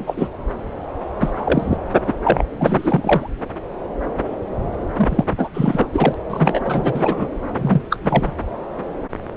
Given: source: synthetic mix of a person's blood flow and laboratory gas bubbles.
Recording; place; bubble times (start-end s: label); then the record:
Doppler ultrasound of blood flow; subclavian vein
0.00-0.03 s: bubbles
0.07-0.29 s: bubbles
1.20-1.32 s: bubbles
1.35-1.77 s: bubbles
2.06-2.15 s: bubbles
2.23-2.43 s: bubbles
2.59-3.30 s: bubbles
4.97-5.25 s: bubbles
5.38-5.50 s: bubbles
5.54-5.87 s: bubbles
5.93-6.14 s: bubbles
6.29-6.60 s: bubbles
6.64-7.27 s: bubbles
7.58-7.82 s: bubbles
7.90-7.97 s: bubbles
8.02-8.35 s: bubbles
From the record:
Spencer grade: 3 (all of the cardiac periods contain showers or single bubble signals, but not dominating or overriding the cardiac motion signals); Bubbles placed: anywhere in the cardiac cycle